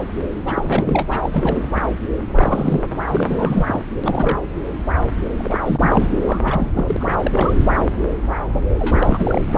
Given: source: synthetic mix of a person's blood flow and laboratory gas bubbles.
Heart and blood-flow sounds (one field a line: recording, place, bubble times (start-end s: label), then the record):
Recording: Doppler ultrasound of blood flow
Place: subclavian vein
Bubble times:
0.46-1.21 s: bubbles
1.23-1.60 s: bubbles
2.31-2.85 s: bubbles
3.08-3.81 s: bubbles
4.04-4.40 s: bubbles
5.38-5.60 s: bubbles
5.66-6.12 s: bubbles
6.25-6.39 s: bubbles
6.44-6.96 s: bubbles
7.00-7.17 s: bubbles
7.22-7.54 s: bubbles
8.78-9.58 s: bubbles
From the record:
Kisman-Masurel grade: 332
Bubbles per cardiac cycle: rolling drumbeat, 9 or more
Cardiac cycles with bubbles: 50 to 99%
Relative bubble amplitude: moderate (0.250 to 0.450)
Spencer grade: 3 (all of the cardiac periods contain showers or single bubble signals, but not dominating or overriding the cardiac motion signals)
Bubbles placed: anywhere in the cardiac cycle